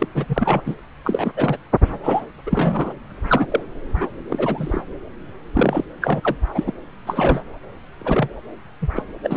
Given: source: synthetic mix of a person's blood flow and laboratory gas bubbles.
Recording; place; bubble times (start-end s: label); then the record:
Doppler ultrasound of blood flow; subclavian vein
0.00-0.08 s: bubbles
0.13-0.26 s: bubbles
0.29-0.61 s: bubbles
0.66-0.75 s: bubbles
1.04-1.31 s: bubbles
1.36-1.57 s: bubbles
2.03-2.21 s: bubbles
2.46-2.93 s: bubbles
3.16-3.45 s: bubbles
3.50-3.63 s: bubbles
3.96-4.07 s: bubbles
4.24-4.27 s: bubbles
4.29-4.82 s: bubbles
5.54-5.85 s: bubbles
6.01-6.21 s: bubbles
6.23-6.35 s: bubbles
6.54-6.72 s: bubbles
7.07-7.41 s: bubbles
7.98-8.30 s: bubbles
8.81-8.88 s: bubbles
8.94-9.03 s: bubbles
9.23-9.37 s: bubbles
From the record:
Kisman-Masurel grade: 242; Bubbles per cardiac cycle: several, 3 to 8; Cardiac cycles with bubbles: 100%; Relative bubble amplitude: moderate (0.250 to 0.450); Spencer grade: 3 (all of the cardiac periods contain showers or single bubble signals, but not dominating or overriding the cardiac motion signals); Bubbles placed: anywhere in the cardiac cycle